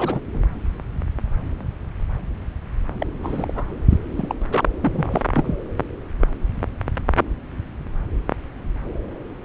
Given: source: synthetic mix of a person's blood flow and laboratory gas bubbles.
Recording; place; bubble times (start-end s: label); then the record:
Doppler ultrasound of blood flow; subclavian vein
0.00-0.21 s: bubbles
0.33-0.41 s: bubbles
3.00-3.06 s: bubbles
3.23-3.52 s: bubbles
3.55-3.65 s: bubbles
3.91-3.97 s: bubbles
4.16-4.34 s: bubbles
4.51-4.64 s: bubbles
4.80-5.21 s: bubbles
5.34-5.56 s: bubbles
From the record:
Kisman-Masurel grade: 221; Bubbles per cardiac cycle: several, 3 to 8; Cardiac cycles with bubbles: 10 to 50%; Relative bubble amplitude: barely perceptible (0.100 to 0.250); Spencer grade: 2 (many but less than half of the cardiac periods contain bubble signals, singularly or in groups); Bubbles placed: anywhere in the cardiac cycle